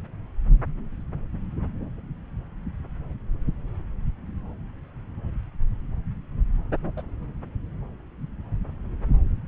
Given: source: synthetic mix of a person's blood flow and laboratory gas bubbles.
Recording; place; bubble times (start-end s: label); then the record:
Doppler ultrasound of blood flow; subclavian vein
6.96-7.02 s: bubbles
From the record:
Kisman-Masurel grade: 111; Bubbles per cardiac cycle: 1 to 2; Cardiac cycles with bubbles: 1 to 10%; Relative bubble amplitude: barely perceptible (0.100 to 0.250); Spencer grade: 1 (occasional bubble signal discernible with the cardiac motion signal, with majority of cardiac periods free of bubbles); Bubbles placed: anywhere in the cardiac cycle